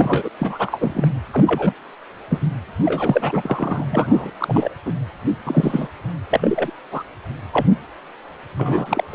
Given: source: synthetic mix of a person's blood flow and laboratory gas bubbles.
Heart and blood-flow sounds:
Doppler ultrasound of blood flow; precordium
0.00-0.29 s: bubbles
0.39-1.08 s: bubbles
1.31-1.73 s: bubbles
2.29-2.39 s: bubbles
2.85-3.85 s: bubbles
3.90-4.31 s: bubbles
4.38-4.70 s: bubbles
4.85-4.93 s: bubbles
5.45-5.88 s: bubbles
6.30-6.72 s: bubbles
6.91-7.03 s: bubbles
7.52-7.66 s: bubbles
8.57-9.04 s: bubbles
9.11-9.15 s: bubbles
From the record:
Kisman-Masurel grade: 242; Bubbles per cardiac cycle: several, 3 to 8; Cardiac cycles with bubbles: 100%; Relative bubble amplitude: moderate (0.250 to 0.450); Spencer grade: 3 (all of the cardiac periods contain showers or single bubble signals, but not dominating or overriding the cardiac motion signals); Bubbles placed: anywhere in the cardiac cycle

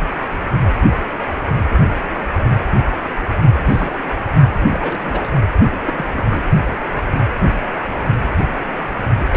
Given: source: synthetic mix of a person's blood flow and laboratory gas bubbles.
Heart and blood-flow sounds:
Doppler ultrasound of blood flow; precordium
3.65-3.96 s: bubbles
4.69-5.30 s: bubbles
5.58-5.67 s: bubbles
5.71-5.79 s: bubbles
5.84-5.93 s: bubbles
5.97-6.06 s: bubbles
6.16-6.23 s: bubbles
6.30-6.42 s: bubbles
9.19-9.36 s: bubbles
From the record:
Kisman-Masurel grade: 221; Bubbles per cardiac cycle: several, 3 to 8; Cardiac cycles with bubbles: 10 to 50%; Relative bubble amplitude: barely perceptible (0.100 to 0.250); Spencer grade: 2 (many but less than half of the cardiac periods contain bubble signals, singularly or in groups); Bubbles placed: only in the low amplitude regions of the cardiac cycle

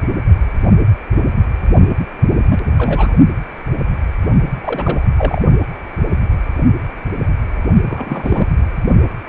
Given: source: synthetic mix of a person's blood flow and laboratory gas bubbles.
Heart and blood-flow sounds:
Doppler ultrasound of blood flow; precordium
0.00-0.04 s: bubbles
2.48-2.60 s: bubbles
2.77-3.14 s: bubbles
4.62-5.08 s: bubbles
5.17-5.42 s: bubbles
7.85-8.48 s: bubbles
8.58-8.66 s: bubbles
From the record:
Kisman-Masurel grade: 222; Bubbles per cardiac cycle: several, 3 to 8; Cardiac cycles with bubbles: 10 to 50%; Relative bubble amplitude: moderate (0.250 to 0.450); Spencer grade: 2 (many but less than half of the cardiac periods contain bubble signals, singularly or in groups); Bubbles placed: only in the low amplitude regions of the cardiac cycle

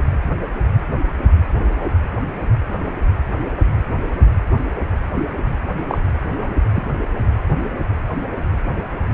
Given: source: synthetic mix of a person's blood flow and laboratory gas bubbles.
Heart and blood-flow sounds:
Doppler ultrasound of blood flow; precordium
5.88-5.98 s: bubbles
6.42-6.54 s: bubbles
6.75-6.87 s: bubbles
From the record:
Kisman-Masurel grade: 222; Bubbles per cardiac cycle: several, 3 to 8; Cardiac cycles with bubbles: 10 to 50%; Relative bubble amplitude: moderate (0.250 to 0.450); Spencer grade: 2 (many but less than half of the cardiac periods contain bubble signals, singularly or in groups); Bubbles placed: only in the low amplitude regions of the cardiac cycle

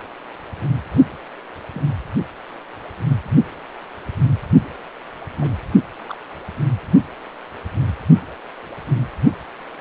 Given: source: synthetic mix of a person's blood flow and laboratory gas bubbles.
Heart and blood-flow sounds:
Doppler ultrasound of blood flow; precordium
1.74-1.82 s: bubbles
5.38-5.55 s: bubbles
6.08-6.15 s: bubbles
From the record:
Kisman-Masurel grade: 121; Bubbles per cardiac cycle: 1 to 2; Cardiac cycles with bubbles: 10 to 50%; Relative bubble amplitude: barely perceptible (0.100 to 0.250); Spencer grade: 2 (many but less than half of the cardiac periods contain bubble signals, singularly or in groups); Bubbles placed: only in the low amplitude regions of the cardiac cycle

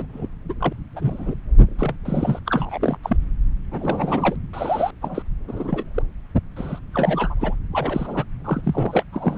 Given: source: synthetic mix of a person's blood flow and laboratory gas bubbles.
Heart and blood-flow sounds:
Doppler ultrasound of blood flow; subclavian vein
0.00-0.05 s: bubbles
0.13-0.28 s: bubbles
0.49-0.54 s: bubbles
0.59-0.72 s: bubbles
0.96-1.34 s: bubbles
1.68-1.95 s: bubbles
2.05-2.39 s: bubbles
2.46-2.97 s: bubbles
3.03-3.17 s: bubbles
3.71-4.36 s: bubbles
4.53-4.91 s: bubbles
5.01-5.22 s: bubbles
5.47-5.92 s: bubbles
5.94-6.02 s: bubbles
6.56-6.79 s: bubbles
6.93-7.55 s: bubbles
7.73-8.24 s: bubbles
8.44-9.03 s: bubbles
9.12-9.38 s: bubbles
From the record:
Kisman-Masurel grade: 242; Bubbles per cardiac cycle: several, 3 to 8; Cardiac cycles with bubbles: 100%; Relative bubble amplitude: moderate (0.250 to 0.450); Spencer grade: 3 (all of the cardiac periods contain showers or single bubble signals, but not dominating or overriding the cardiac motion signals); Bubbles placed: anywhere in the cardiac cycle

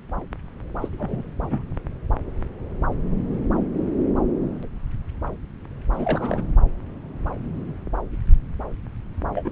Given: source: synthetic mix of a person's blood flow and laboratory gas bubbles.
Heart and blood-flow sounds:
Doppler ultrasound of blood flow; subclavian vein
0.81-0.88 s: bubbles
0.98-1.31 s: bubbles
1.42-1.68 s: bubbles
5.92-6.44 s: bubbles
9.34-9.52 s: bubbles
From the record:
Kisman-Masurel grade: 221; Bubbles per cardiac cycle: several, 3 to 8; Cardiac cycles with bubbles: 10 to 50%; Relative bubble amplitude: barely perceptible (0.100 to 0.250); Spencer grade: 2 (many but less than half of the cardiac periods contain bubble signals, singularly or in groups); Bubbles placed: anywhere in the cardiac cycle

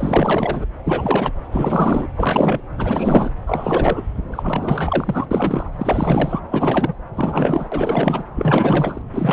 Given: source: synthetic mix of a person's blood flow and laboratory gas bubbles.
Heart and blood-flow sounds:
Doppler ultrasound of blood flow; subclavian vein
0.00-0.65 s: bubbles
0.85-1.31 s: bubbles
1.52-2.08 s: bubbles
2.16-2.60 s: bubbles
2.77-3.31 s: bubbles
3.47-4.02 s: bubbles
4.31-5.26 s: bubbles
5.30-5.68 s: bubbles
5.76-6.40 s: bubbles
6.49-6.96 s: bubbles
7.15-7.68 s: bubbles
7.71-8.24 s: bubbles
8.36-9.03 s: bubbles
9.12-9.33 s: bubbles
From the record:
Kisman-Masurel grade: 444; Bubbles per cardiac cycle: continuous sound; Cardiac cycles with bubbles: 100%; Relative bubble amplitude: maximal (0.775 to 0.999); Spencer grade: 4 (maximum detectable bubble signal sounding continuously throughout systole and diastole of every cardiac period, and overriding the amplitude of the normal cardiac signals); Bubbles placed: anywhere in the cardiac cycle

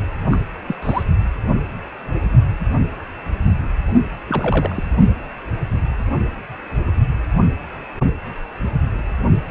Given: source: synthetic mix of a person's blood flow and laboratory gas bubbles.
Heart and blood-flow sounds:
Doppler ultrasound of blood flow; precordium
0.31-0.41 s: bubbles
0.67-0.76 s: bubbles
0.82-1.03 s: bubbles
4.29-4.83 s: bubbles
From the record:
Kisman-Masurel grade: 222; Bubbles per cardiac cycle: several, 3 to 8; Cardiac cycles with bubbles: 10 to 50%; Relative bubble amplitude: moderate (0.250 to 0.450); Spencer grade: 2 (many but less than half of the cardiac periods contain bubble signals, singularly or in groups); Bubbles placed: only in the low amplitude regions of the cardiac cycle

